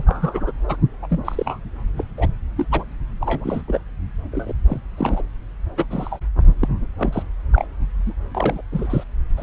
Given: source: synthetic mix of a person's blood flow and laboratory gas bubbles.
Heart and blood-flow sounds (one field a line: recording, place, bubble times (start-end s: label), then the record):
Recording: Doppler ultrasound of blood flow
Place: subclavian vein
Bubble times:
0.00-0.52 s: bubbles
0.68-0.77 s: bubbles
1.02-1.20 s: bubbles
1.25-1.60 s: bubbles
1.98-2.05 s: bubbles
2.17-2.29 s: bubbles
2.57-2.66 s: bubbles
2.71-2.85 s: bubbles
3.20-3.62 s: bubbles
3.68-3.81 s: bubbles
4.31-4.53 s: bubbles
4.67-4.80 s: bubbles
4.97-5.22 s: bubbles
5.77-5.85 s: bubbles
5.90-6.19 s: bubbles
6.60-6.68 s: bubbles
6.98-7.23 s: bubbles
7.52-7.67 s: bubbles
8.05-8.13 s: bubbles
8.35-8.62 s: bubbles
8.71-9.04 s: bubbles
9.37-9.43 s: bubbles
From the record:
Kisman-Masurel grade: 242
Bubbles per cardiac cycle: several, 3 to 8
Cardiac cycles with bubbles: 100%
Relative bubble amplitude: moderate (0.250 to 0.450)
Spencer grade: 3 (all of the cardiac periods contain showers or single bubble signals, but not dominating or overriding the cardiac motion signals)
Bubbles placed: anywhere in the cardiac cycle